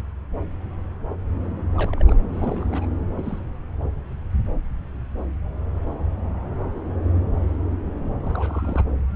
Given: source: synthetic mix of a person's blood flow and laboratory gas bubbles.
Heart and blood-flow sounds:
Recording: Doppler ultrasound of blood flow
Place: subclavian vein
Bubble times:
1.77-2.22 s: bubbles
2.32-2.86 s: bubbles
3.17-3.40 s: bubbles
8.22-8.84 s: bubbles
From the record:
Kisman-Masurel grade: 221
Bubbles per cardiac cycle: several, 3 to 8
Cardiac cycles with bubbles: 10 to 50%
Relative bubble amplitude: barely perceptible (0.100 to 0.250)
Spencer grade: 2 (many but less than half of the cardiac periods contain bubble signals, singularly or in groups)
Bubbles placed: anywhere in the cardiac cycle

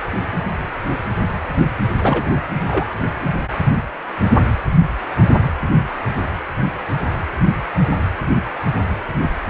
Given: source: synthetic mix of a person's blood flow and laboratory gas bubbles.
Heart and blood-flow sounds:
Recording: Doppler ultrasound of blood flow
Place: precordium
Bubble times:
2.00-2.31 s: bubbles
2.65-2.85 s: bubbles
From the record:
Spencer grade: 2 (many but less than half of the cardiac periods contain bubble signals, singularly or in groups)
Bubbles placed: anywhere in the cardiac cycle

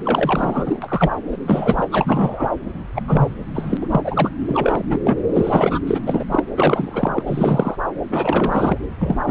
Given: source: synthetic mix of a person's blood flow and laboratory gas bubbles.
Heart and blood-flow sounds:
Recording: Doppler ultrasound of blood flow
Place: subclavian vein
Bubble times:
0.04-1.11 s: bubbles
1.31-1.37 s: bubbles
1.46-1.88 s: bubbles
1.91-2.50 s: bubbles
2.95-3.02 s: bubbles
3.07-3.36 s: bubbles
3.54-3.77 s: bubbles
3.81-3.88 s: bubbles
3.91-4.30 s: bubbles
4.48-4.83 s: bubbles
4.89-5.00 s: bubbles
5.04-5.17 s: bubbles
5.33-5.79 s: bubbles
5.87-6.01 s: bubbles
6.05-6.25 s: bubbles
6.30-6.44 s: bubbles
6.57-7.22 s: bubbles
7.26-7.75 s: bubbles
8.11-8.78 s: bubbles
8.99-9.17 s: bubbles
9.26-9.31 s: bubbles
From the record:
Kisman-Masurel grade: 343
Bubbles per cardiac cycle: rolling drumbeat, 9 or more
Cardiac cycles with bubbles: 100%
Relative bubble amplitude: loud (0.450 to 0.775)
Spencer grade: 3 (all of the cardiac periods contain showers or single bubble signals, but not dominating or overriding the cardiac motion signals)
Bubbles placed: anywhere in the cardiac cycle

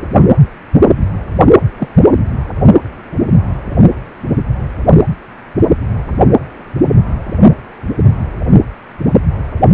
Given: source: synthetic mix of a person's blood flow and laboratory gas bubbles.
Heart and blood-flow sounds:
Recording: Doppler ultrasound of blood flow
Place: precordium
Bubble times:
1.79-1.89 s: bubbles
From the record:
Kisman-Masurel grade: 113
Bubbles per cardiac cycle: 1 to 2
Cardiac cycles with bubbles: 1 to 10%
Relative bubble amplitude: loud (0.450 to 0.775)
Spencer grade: 1 (occasional bubble signal discernible with the cardiac motion signal, with majority of cardiac periods free of bubbles)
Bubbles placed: only in the low amplitude regions of the cardiac cycle

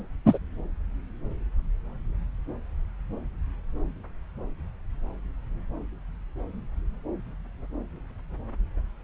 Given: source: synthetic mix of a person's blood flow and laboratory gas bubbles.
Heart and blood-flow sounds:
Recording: Doppler ultrasound of blood flow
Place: subclavian vein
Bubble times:
0.26-0.38 s: bubbles
From the record:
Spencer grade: 1 (occasional bubble signal discernible with the cardiac motion signal, with majority of cardiac periods free of bubbles)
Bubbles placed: anywhere in the cardiac cycle

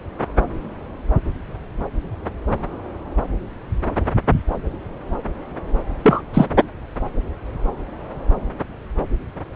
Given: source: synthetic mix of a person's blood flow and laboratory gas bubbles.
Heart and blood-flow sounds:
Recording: Doppler ultrasound of blood flow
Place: subclavian vein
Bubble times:
6.02-6.21 s: bubbles
6.33-6.46 s: bubbles
From the record:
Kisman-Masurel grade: 213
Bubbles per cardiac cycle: several, 3 to 8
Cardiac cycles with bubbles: 1 to 10%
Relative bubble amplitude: loud (0.450 to 0.775)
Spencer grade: 1 (occasional bubble signal discernible with the cardiac motion signal, with majority of cardiac periods free of bubbles)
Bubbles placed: anywhere in the cardiac cycle

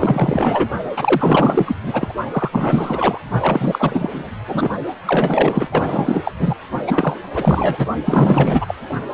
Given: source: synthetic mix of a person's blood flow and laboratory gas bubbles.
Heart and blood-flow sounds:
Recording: Doppler ultrasound of blood flow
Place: precordium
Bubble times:
0.00-0.69 s: bubbles
0.96-1.76 s: bubbles
1.84-2.13 s: bubbles
2.31-3.19 s: bubbles
3.40-4.31 s: bubbles
4.48-4.70 s: bubbles
5.06-5.69 s: bubbles
5.71-6.21 s: bubbles
6.25-6.33 s: bubbles
6.39-6.54 s: bubbles
6.87-7.20 s: bubbles
7.35-7.87 s: bubbles
8.05-8.75 s: bubbles
From the record:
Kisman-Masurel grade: 444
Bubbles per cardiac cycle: continuous sound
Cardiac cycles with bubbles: 100%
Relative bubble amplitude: maximal (0.775 to 0.999)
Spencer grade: 4 (maximum detectable bubble signal sounding continuously throughout systole and diastole of every cardiac period, and overriding the amplitude of the normal cardiac signals)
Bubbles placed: only in the low amplitude regions of the cardiac cycle

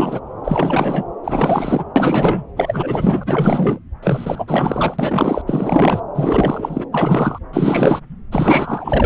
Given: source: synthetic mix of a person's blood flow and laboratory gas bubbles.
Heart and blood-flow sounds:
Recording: Doppler ultrasound of blood flow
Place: subclavian vein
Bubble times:
0.00-0.20 s: bubbles
0.44-1.05 s: bubbles
1.24-1.84 s: bubbles
1.95-2.43 s: bubbles
2.56-3.79 s: bubbles
4.02-4.44 s: bubbles
4.47-5.42 s: bubbles
5.46-6.02 s: bubbles
6.14-6.85 s: bubbles
6.92-7.38 s: bubbles
7.53-8.00 s: bubbles
8.32-9.06 s: bubbles
From the record:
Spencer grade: 4 (maximum detectable bubble signal sounding continuously throughout systole and diastole of every cardiac period, and overriding the amplitude of the normal cardiac signals)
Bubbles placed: anywhere in the cardiac cycle

